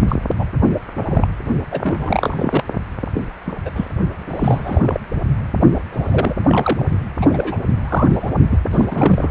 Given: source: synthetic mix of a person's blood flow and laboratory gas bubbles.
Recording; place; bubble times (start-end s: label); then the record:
Doppler ultrasound of blood flow; precordium
0.08-0.16 s: bubbles
0.39-0.46 s: bubbles
1.08-1.28 s: bubbles
1.72-1.81 s: bubbles
1.84-2.63 s: bubbles
3.14-3.23 s: bubbles
3.46-3.53 s: bubbles
3.65-3.70 s: bubbles
3.75-3.86 s: bubbles
4.29-5.00 s: bubbles
5.75-5.81 s: bubbles
5.92-6.35 s: bubbles
6.45-6.86 s: bubbles
7.21-7.27 s: bubbles
7.29-7.58 s: bubbles
7.83-8.31 s: bubbles
8.50-8.58 s: bubbles
8.71-8.85 s: bubbles
8.90-9.31 s: bubbles
From the record:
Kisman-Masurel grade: 242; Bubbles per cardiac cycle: several, 3 to 8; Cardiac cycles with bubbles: 100%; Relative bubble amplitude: moderate (0.250 to 0.450); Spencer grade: 3 (all of the cardiac periods contain showers or single bubble signals, but not dominating or overriding the cardiac motion signals); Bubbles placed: only in the low amplitude regions of the cardiac cycle